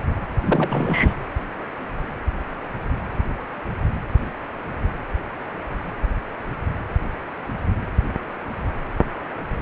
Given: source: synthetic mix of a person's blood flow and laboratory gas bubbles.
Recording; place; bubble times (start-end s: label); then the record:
Doppler ultrasound of blood flow; precordium
0.45-1.15 s: bubbles
From the record:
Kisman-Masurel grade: 222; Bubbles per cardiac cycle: several, 3 to 8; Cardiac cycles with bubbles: 10 to 50%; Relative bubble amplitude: moderate (0.250 to 0.450); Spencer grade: 2 (many but less than half of the cardiac periods contain bubble signals, singularly or in groups); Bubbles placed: anywhere in the cardiac cycle